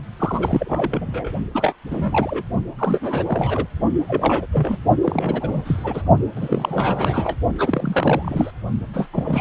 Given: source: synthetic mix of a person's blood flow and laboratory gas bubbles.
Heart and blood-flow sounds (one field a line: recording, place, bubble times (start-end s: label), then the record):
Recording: Doppler ultrasound of blood flow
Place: precordium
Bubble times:
0.19-1.31 s: bubbles
1.53-1.75 s: bubbles
1.91-2.43 s: bubbles
2.79-3.23 s: bubbles
3.26-3.67 s: bubbles
4.07-4.46 s: bubbles
4.52-4.77 s: bubbles
5.02-6.02 s: bubbles
6.36-7.36 s: bubbles
7.58-8.50 s: bubbles
8.94-9.08 s: bubbles
9.13-9.41 s: bubbles
From the record:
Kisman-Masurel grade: 332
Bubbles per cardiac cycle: rolling drumbeat, 9 or more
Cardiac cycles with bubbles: 50 to 99%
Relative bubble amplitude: moderate (0.250 to 0.450)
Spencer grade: 3 (all of the cardiac periods contain showers or single bubble signals, but not dominating or overriding the cardiac motion signals)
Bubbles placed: only in the low amplitude regions of the cardiac cycle